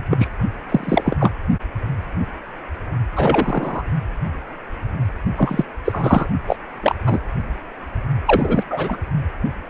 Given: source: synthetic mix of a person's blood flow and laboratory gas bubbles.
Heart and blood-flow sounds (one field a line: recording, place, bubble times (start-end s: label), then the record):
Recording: Doppler ultrasound of blood flow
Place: precordium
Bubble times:
0.10-0.28 s: bubbles
0.69-1.17 s: bubbles
1.19-1.31 s: bubbles
3.16-3.84 s: bubbles
5.36-5.63 s: bubbles
5.84-6.28 s: bubbles
6.47-6.57 s: bubbles
6.82-6.95 s: bubbles
7.04-7.19 s: bubbles
8.26-8.63 s: bubbles
8.70-8.97 s: bubbles
From the record:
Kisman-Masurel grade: 233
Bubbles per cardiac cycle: several, 3 to 8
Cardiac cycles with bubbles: 50 to 99%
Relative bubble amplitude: loud (0.450 to 0.775)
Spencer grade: 3 (all of the cardiac periods contain showers or single bubble signals, but not dominating or overriding the cardiac motion signals)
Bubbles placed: only in the low amplitude regions of the cardiac cycle